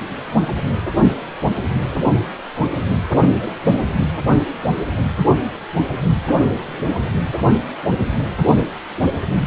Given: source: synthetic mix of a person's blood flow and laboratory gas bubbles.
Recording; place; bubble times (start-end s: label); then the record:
Doppler ultrasound of blood flow; precordium
3.40-3.52 s: bubbles
3.87-4.12 s: bubbles
From the record:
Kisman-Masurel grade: 211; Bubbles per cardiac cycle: several, 3 to 8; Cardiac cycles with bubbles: 1 to 10%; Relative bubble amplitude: barely perceptible (0.100 to 0.250); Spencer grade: 1 (occasional bubble signal discernible with the cardiac motion signal, with majority of cardiac periods free of bubbles); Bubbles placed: anywhere in the cardiac cycle